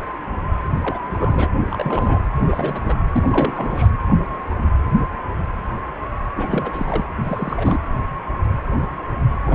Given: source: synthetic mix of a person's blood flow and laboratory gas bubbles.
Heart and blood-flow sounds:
Doppler ultrasound of blood flow; precordium
0.82-0.99 s: bubbles
1.06-1.49 s: bubbles
1.71-2.23 s: bubbles
2.47-2.98 s: bubbles
3.13-3.89 s: bubbles
6.36-7.05 s: bubbles
7.16-7.79 s: bubbles
9.46-9.55 s: bubbles
From the record:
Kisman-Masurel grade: 332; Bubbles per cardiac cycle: rolling drumbeat, 9 or more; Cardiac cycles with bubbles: 50 to 99%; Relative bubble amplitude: moderate (0.250 to 0.450); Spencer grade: 3 (all of the cardiac periods contain showers or single bubble signals, but not dominating or overriding the cardiac motion signals); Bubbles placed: anywhere in the cardiac cycle

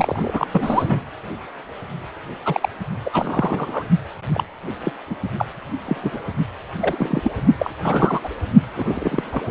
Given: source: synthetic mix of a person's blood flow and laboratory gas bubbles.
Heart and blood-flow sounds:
Doppler ultrasound of blood flow; precordium
0.00-0.47 s: bubbles
0.52-1.02 s: bubbles
2.45-2.69 s: bubbles
3.05-3.89 s: bubbles
4.33-4.44 s: bubbles
4.83-4.92 s: bubbles
5.09-5.15 s: bubbles
5.38-5.46 s: bubbles
5.86-6.19 s: bubbles
6.79-7.31 s: bubbles
7.58-7.70 s: bubbles
7.82-8.20 s: bubbles
8.23-8.28 s: bubbles
8.76-9.23 s: bubbles
9.32-9.42 s: bubbles
From the record:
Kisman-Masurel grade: 242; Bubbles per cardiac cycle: several, 3 to 8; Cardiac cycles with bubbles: 100%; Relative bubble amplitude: moderate (0.250 to 0.450); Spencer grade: 3 (all of the cardiac periods contain showers or single bubble signals, but not dominating or overriding the cardiac motion signals); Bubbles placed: only in the low amplitude regions of the cardiac cycle

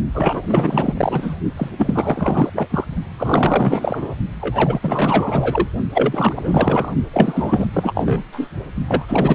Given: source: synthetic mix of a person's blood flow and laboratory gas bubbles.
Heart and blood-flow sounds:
Doppler ultrasound of blood flow; precordium
0.11-0.43 s: bubbles
0.46-0.94 s: bubbles
0.97-1.35 s: bubbles
1.56-1.70 s: bubbles
1.77-2.50 s: bubbles
2.52-2.68 s: bubbles
2.71-2.85 s: bubbles
3.17-4.15 s: bubbles
4.41-5.67 s: bubbles
5.94-6.92 s: bubbles
7.12-7.66 s: bubbles
7.73-8.23 s: bubbles
8.32-8.50 s: bubbles
8.88-9.35 s: bubbles
From the record:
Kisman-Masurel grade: 444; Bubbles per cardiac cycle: continuous sound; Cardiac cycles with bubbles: 100%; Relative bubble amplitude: maximal (0.775 to 0.999); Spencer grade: 4 (maximum detectable bubble signal sounding continuously throughout systole and diastole of every cardiac period, and overriding the amplitude of the normal cardiac signals); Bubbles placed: only in the low amplitude regions of the cardiac cycle

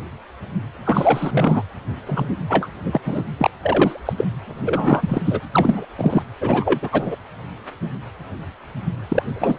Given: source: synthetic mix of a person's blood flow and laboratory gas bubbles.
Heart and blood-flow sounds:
Doppler ultrasound of blood flow; precordium
0.85-1.62 s: bubbles
2.06-2.29 s: bubbles
2.49-2.67 s: bubbles
2.83-3.00 s: bubbles
3.05-3.23 s: bubbles
3.38-3.50 s: bubbles
3.63-4.13 s: bubbles
4.17-4.25 s: bubbles
4.47-5.22 s: bubbles
5.25-5.41 s: bubbles
5.51-5.86 s: bubbles
5.97-6.22 s: bubbles
6.41-6.89 s: bubbles
6.92-7.16 s: bubbles
9.08-9.23 s: bubbles
9.33-9.59 s: bubbles
From the record:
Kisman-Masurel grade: 333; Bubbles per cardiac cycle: rolling drumbeat, 9 or more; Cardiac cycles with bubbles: 50 to 99%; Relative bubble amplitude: loud (0.450 to 0.775); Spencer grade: 3 (all of the cardiac periods contain showers or single bubble signals, but not dominating or overriding the cardiac motion signals); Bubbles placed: anywhere in the cardiac cycle

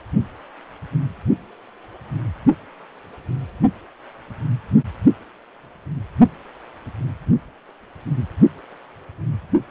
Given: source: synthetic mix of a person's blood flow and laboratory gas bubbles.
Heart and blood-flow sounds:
Doppler ultrasound of blood flow; precordium
no bubbles
From the record:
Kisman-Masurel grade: 000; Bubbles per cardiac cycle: 0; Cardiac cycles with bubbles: 0%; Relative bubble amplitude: no bubbles discernible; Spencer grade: 0 (complete lack of bubble signals)

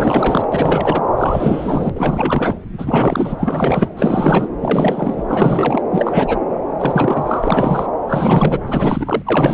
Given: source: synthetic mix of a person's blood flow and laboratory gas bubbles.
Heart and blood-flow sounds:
Doppler ultrasound of blood flow; subclavian vein
0.00-0.48 s: bubbles
0.52-1.03 s: bubbles
1.18-1.90 s: bubbles
1.95-2.56 s: bubbles
2.77-3.89 s: bubbles
3.97-4.47 s: bubbles
4.62-5.25 s: bubbles
5.28-5.82 s: bubbles
5.90-6.40 s: bubbles
6.77-7.92 s: bubbles
8.07-8.61 s: bubbles
8.67-9.22 s: bubbles
9.26-9.54 s: bubbles
From the record:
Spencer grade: 4 (maximum detectable bubble signal sounding continuously throughout systole and diastole of every cardiac period, and overriding the amplitude of the normal cardiac signals); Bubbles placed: anywhere in the cardiac cycle

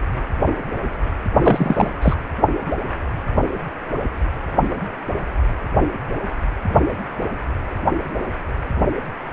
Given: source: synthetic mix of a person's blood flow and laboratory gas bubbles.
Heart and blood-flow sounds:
Doppler ultrasound of blood flow; precordium
1.44-1.90 s: bubbles
2.02-2.16 s: bubbles
From the record:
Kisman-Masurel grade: 213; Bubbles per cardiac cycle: several, 3 to 8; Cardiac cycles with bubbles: 1 to 10%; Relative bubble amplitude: loud (0.450 to 0.775); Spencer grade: 1 (occasional bubble signal discernible with the cardiac motion signal, with majority of cardiac periods free of bubbles); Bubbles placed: anywhere in the cardiac cycle

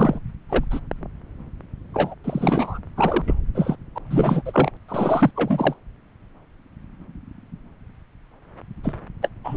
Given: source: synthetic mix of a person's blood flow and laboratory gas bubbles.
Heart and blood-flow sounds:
Doppler ultrasound of blood flow; subclavian vein
0.00-0.20 s: bubbles
0.49-0.65 s: bubbles
0.70-0.80 s: bubbles
1.93-2.15 s: bubbles
2.24-2.79 s: bubbles
2.96-3.35 s: bubbles
3.54-3.76 s: bubbles
3.95-3.99 s: bubbles
4.10-4.42 s: bubbles
4.45-4.71 s: bubbles
4.88-5.31 s: bubbles
5.35-5.74 s: bubbles
8.84-8.96 s: bubbles
9.21-9.29 s: bubbles
9.44-9.57 s: bubbles
From the record:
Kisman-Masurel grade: 333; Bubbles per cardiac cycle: rolling drumbeat, 9 or more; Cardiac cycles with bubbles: 50 to 99%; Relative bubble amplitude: loud (0.450 to 0.775); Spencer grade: 3 (all of the cardiac periods contain showers or single bubble signals, but not dominating or overriding the cardiac motion signals); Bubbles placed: anywhere in the cardiac cycle

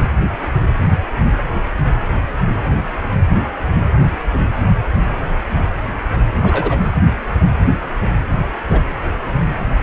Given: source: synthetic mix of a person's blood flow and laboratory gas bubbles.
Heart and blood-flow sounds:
Doppler ultrasound of blood flow; precordium
6.41-6.79 s: bubbles
8.70-8.80 s: bubbles
From the record:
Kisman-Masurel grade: 122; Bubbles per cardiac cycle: 1 to 2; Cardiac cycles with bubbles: 10 to 50%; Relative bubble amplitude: moderate (0.250 to 0.450); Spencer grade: 2 (many but less than half of the cardiac periods contain bubble signals, singularly or in groups); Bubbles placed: anywhere in the cardiac cycle

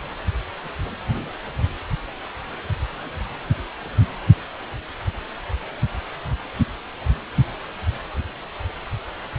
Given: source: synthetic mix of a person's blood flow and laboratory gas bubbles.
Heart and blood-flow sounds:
Doppler ultrasound of blood flow; precordium
no bubbles
From the record:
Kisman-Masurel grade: 000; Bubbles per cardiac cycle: 0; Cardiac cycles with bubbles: 0%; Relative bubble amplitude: no bubbles discernible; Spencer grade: 0 (complete lack of bubble signals)

